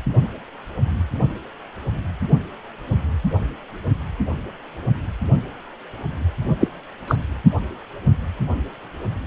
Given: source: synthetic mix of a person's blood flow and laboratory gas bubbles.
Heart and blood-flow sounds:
Doppler ultrasound of blood flow; precordium
6.60-6.67 s: bubbles
7.07-7.16 s: bubbles
From the record:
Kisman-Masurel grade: 113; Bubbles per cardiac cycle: 1 to 2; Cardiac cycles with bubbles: 1 to 10%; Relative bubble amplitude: loud (0.450 to 0.775); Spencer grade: 1 (occasional bubble signal discernible with the cardiac motion signal, with majority of cardiac periods free of bubbles); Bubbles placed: only in the low amplitude regions of the cardiac cycle

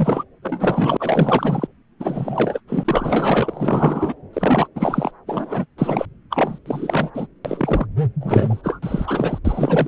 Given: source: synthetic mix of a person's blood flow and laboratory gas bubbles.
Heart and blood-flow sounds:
Doppler ultrasound of blood flow; subclavian vein
0.00-0.23 s: bubbles
0.42-1.67 s: bubbles
2.00-2.60 s: bubbles
2.67-4.15 s: bubbles
4.33-4.67 s: bubbles
4.75-5.11 s: bubbles
5.26-5.66 s: bubbles
5.78-6.06 s: bubbles
6.30-6.58 s: bubbles
6.66-7.10 s: bubbles
7.13-7.26 s: bubbles
7.45-7.87 s: bubbles
8.20-8.79 s: bubbles
8.82-9.38 s: bubbles
9.45-9.87 s: bubbles
From the record:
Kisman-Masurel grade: 444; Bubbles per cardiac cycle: continuous sound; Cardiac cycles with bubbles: 100%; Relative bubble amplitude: maximal (0.775 to 0.999); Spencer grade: 4 (maximum detectable bubble signal sounding continuously throughout systole and diastole of every cardiac period, and overriding the amplitude of the normal cardiac signals); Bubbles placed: anywhere in the cardiac cycle

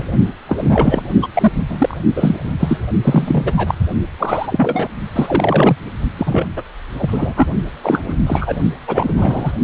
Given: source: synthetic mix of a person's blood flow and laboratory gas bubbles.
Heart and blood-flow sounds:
Doppler ultrasound of blood flow; precordium
0.00-0.06 s: bubbles
0.47-1.03 s: bubbles
1.22-1.28 s: bubbles
1.33-1.52 s: bubbles
1.69-1.97 s: bubbles
2.15-2.54 s: bubbles
2.60-2.79 s: bubbles
3.02-3.52 s: bubbles
3.56-3.75 s: bubbles
4.19-4.89 s: bubbles
5.12-5.76 s: bubbles
6.18-6.49 s: bubbles
6.56-6.63 s: bubbles
6.98-7.47 s: bubbles
7.83-8.01 s: bubbles
8.08-8.14 s: bubbles
8.26-8.57 s: bubbles
8.87-9.52 s: bubbles
From the record:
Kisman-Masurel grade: 343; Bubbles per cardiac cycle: rolling drumbeat, 9 or more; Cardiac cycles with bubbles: 100%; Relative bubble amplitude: loud (0.450 to 0.775); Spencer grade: 3 (all of the cardiac periods contain showers or single bubble signals, but not dominating or overriding the cardiac motion signals); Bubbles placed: only in the low amplitude regions of the cardiac cycle

